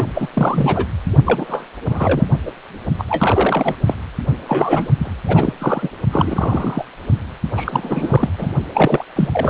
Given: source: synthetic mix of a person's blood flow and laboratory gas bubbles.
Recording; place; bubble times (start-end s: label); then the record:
Doppler ultrasound of blood flow; precordium
0.00-0.04 s: bubbles
0.14-0.28 s: bubbles
0.34-0.87 s: bubbles
1.25-1.69 s: bubbles
1.89-2.27 s: bubbles
2.45-2.52 s: bubbles
2.98-3.04 s: bubbles
3.08-3.75 s: bubbles
3.85-3.95 s: bubbles
4.48-4.89 s: bubbles
4.99-5.12 s: bubbles
5.25-5.54 s: bubbles
5.59-5.89 s: bubbles
6.12-6.84 s: bubbles
7.55-8.30 s: bubbles
8.38-8.50 s: bubbles
8.73-9.03 s: bubbles
9.16-9.28 s: bubbles
9.31-9.50 s: bubbles
From the record:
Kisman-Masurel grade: 342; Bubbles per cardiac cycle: rolling drumbeat, 9 or more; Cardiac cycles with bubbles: 100%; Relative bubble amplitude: moderate (0.250 to 0.450); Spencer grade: 3 (all of the cardiac periods contain showers or single bubble signals, but not dominating or overriding the cardiac motion signals); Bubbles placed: only in the low amplitude regions of the cardiac cycle